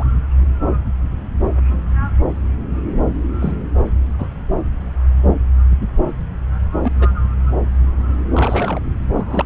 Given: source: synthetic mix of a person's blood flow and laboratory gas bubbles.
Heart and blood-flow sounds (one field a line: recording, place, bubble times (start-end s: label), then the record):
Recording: Doppler ultrasound of blood flow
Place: subclavian vein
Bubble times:
0.00-0.04 s: bubbles
3.41-3.53 s: bubbles
4.18-4.33 s: bubbles
6.83-6.91 s: bubbles
6.97-7.06 s: bubbles
8.34-8.80 s: bubbles
9.13-9.45 s: bubbles
From the record:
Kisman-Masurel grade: 122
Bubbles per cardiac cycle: 1 to 2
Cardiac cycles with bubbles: 10 to 50%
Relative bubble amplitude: moderate (0.250 to 0.450)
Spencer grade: 2 (many but less than half of the cardiac periods contain bubble signals, singularly or in groups)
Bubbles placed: anywhere in the cardiac cycle